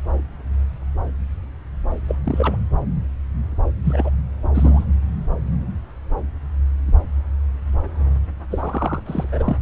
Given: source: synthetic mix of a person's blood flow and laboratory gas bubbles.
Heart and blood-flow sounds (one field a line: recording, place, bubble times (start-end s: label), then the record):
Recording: Doppler ultrasound of blood flow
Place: subclavian vein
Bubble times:
2.07-2.15 s: bubbles
2.25-2.56 s: bubbles
3.84-4.10 s: bubbles
4.54-4.84 s: bubbles
8.51-9.03 s: bubbles
9.06-9.57 s: bubbles
From the record:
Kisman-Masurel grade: 222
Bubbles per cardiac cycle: several, 3 to 8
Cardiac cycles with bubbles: 10 to 50%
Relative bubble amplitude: moderate (0.250 to 0.450)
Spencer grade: 2 (many but less than half of the cardiac periods contain bubble signals, singularly or in groups)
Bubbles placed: anywhere in the cardiac cycle